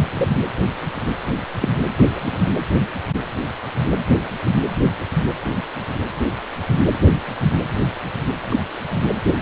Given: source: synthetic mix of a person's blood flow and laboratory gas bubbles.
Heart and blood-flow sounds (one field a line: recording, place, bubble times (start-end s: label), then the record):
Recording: Doppler ultrasound of blood flow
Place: precordium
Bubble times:
0.14-0.28 s: bubbles
1.59-1.69 s: bubbles
2.10-2.49 s: bubbles
8.50-8.60 s: bubbles
From the record:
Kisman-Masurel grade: 122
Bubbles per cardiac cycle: 1 to 2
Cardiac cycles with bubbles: 10 to 50%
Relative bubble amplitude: moderate (0.250 to 0.450)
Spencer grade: 2 (many but less than half of the cardiac periods contain bubble signals, singularly or in groups)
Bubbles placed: anywhere in the cardiac cycle